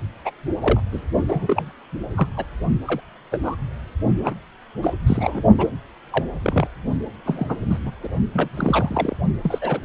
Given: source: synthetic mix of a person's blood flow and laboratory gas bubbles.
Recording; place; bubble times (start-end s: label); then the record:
Doppler ultrasound of blood flow; precordium
0.25-0.30 s: bubbles
0.60-0.80 s: bubbles
0.92-1.01 s: bubbles
1.24-1.72 s: bubbles
2.15-2.27 s: bubbles
2.36-2.44 s: bubbles
2.85-3.00 s: bubbles
3.31-3.39 s: bubbles
3.44-3.55 s: bubbles
4.20-4.34 s: bubbles
4.82-4.93 s: bubbles
5.07-5.42 s: bubbles
5.58-5.67 s: bubbles
6.12-6.24 s: bubbles
6.42-6.68 s: bubbles
7.26-7.57 s: bubbles
7.70-7.79 s: bubbles
7.85-7.92 s: bubbles
8.03-8.09 s: bubbles
8.33-8.49 s: bubbles
8.55-9.18 s: bubbles
9.43-9.59 s: bubbles
9.61-9.79 s: bubbles
From the record:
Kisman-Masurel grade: 242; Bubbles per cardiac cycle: several, 3 to 8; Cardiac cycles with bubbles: 100%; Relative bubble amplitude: moderate (0.250 to 0.450); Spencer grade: 3 (all of the cardiac periods contain showers or single bubble signals, but not dominating or overriding the cardiac motion signals); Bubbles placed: only in the low amplitude regions of the cardiac cycle